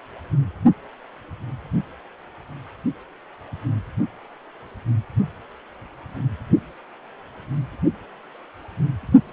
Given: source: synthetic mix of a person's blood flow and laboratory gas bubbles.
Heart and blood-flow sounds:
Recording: Doppler ultrasound of blood flow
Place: precordium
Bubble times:
no bubbles
From the record:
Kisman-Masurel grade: 000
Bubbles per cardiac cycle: 0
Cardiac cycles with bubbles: 0%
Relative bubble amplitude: no bubbles discernible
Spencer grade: 0 (complete lack of bubble signals)

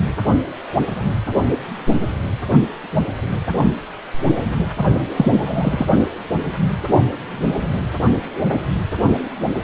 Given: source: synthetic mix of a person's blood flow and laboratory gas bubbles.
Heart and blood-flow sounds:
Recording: Doppler ultrasound of blood flow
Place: precordium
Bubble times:
5.16-5.86 s: bubbles
From the record:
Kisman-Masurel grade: 213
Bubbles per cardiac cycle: several, 3 to 8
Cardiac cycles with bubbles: 1 to 10%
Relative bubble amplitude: loud (0.450 to 0.775)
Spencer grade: 1 (occasional bubble signal discernible with the cardiac motion signal, with majority of cardiac periods free of bubbles)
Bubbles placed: only in the low amplitude regions of the cardiac cycle

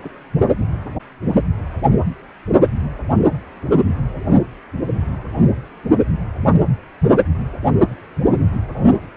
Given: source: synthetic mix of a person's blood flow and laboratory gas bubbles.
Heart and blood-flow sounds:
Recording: Doppler ultrasound of blood flow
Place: precordium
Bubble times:
0.02-0.23 s: bubbles
8.84-9.00 s: bubbles
From the record:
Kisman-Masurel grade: 121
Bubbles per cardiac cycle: 1 to 2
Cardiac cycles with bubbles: 10 to 50%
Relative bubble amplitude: barely perceptible (0.100 to 0.250)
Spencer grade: 2 (many but less than half of the cardiac periods contain bubble signals, singularly or in groups)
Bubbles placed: anywhere in the cardiac cycle

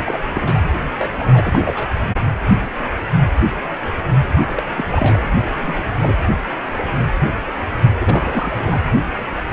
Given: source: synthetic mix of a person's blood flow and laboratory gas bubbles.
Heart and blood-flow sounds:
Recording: Doppler ultrasound of blood flow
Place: precordium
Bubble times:
0.05-0.19 s: bubbles
0.34-0.60 s: bubbles
0.99-1.09 s: bubbles
1.18-1.89 s: bubbles
4.36-4.42 s: bubbles
4.57-4.63 s: bubbles
4.69-5.26 s: bubbles
5.34-5.45 s: bubbles
5.58-5.83 s: bubbles
5.99-6.15 s: bubbles
7.98-8.80 s: bubbles
From the record:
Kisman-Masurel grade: 222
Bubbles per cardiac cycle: several, 3 to 8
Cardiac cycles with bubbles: 10 to 50%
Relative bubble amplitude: moderate (0.250 to 0.450)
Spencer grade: 2 (many but less than half of the cardiac periods contain bubble signals, singularly or in groups)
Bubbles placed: anywhere in the cardiac cycle

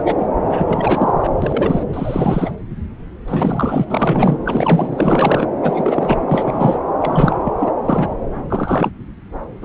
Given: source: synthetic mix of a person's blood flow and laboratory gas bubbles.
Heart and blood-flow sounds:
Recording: Doppler ultrasound of blood flow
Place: subclavian vein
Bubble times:
0.00-0.02 s: bubbles
0.05-0.27 s: bubbles
0.49-1.29 s: bubbles
1.42-1.85 s: bubbles
1.93-2.51 s: bubbles
3.27-3.85 s: bubbles
3.90-4.38 s: bubbles
4.45-5.47 s: bubbles
5.61-6.80 s: bubbles
7.00-7.36 s: bubbles
7.44-7.53 s: bubbles
7.58-7.71 s: bubbles
7.88-8.09 s: bubbles
8.50-8.91 s: bubbles
9.62-9.65 s: bubbles
From the record:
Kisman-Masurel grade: 333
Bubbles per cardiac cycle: rolling drumbeat, 9 or more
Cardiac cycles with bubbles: 50 to 99%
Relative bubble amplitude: loud (0.450 to 0.775)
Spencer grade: 3 (all of the cardiac periods contain showers or single bubble signals, but not dominating or overriding the cardiac motion signals)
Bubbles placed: anywhere in the cardiac cycle

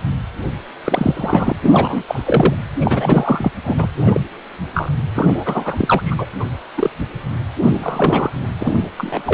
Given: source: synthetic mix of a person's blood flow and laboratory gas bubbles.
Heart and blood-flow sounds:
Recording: Doppler ultrasound of blood flow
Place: precordium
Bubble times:
0.84-1.52 s: bubbles
1.62-2.03 s: bubbles
2.08-2.54 s: bubbles
2.80-3.51 s: bubbles
3.63-3.87 s: bubbles
4.06-4.21 s: bubbles
4.74-4.91 s: bubbles
5.14-6.03 s: bubbles
6.05-6.15 s: bubbles
6.17-6.25 s: bubbles
6.40-6.45 s: bubbles
6.77-6.90 s: bubbles
7.62-8.30 s: bubbles
8.59-8.89 s: bubbles
8.97-9.22 s: bubbles
9.26-9.34 s: bubbles
From the record:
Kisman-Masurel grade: 243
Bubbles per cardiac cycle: several, 3 to 8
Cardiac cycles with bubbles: 100%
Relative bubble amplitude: loud (0.450 to 0.775)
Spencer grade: 3 (all of the cardiac periods contain showers or single bubble signals, but not dominating or overriding the cardiac motion signals)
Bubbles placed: anywhere in the cardiac cycle

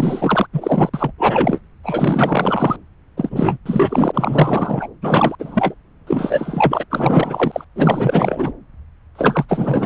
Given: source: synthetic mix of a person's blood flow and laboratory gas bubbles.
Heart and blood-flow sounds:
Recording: Doppler ultrasound of blood flow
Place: subclavian vein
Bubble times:
0.00-0.47 s: bubbles
0.52-0.90 s: bubbles
0.94-1.13 s: bubbles
1.18-1.60 s: bubbles
1.83-2.78 s: bubbles
3.17-3.57 s: bubbles
3.65-4.89 s: bubbles
5.02-5.35 s: bubbles
5.39-5.75 s: bubbles
6.07-6.85 s: bubbles
6.90-7.65 s: bubbles
7.76-8.53 s: bubbles
9.15-9.45 s: bubbles
9.48-9.86 s: bubbles
From the record:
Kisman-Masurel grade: 444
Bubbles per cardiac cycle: continuous sound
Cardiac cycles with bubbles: 100%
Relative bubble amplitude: maximal (0.775 to 0.999)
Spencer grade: 4 (maximum detectable bubble signal sounding continuously throughout systole and diastole of every cardiac period, and overriding the amplitude of the normal cardiac signals)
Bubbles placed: anywhere in the cardiac cycle

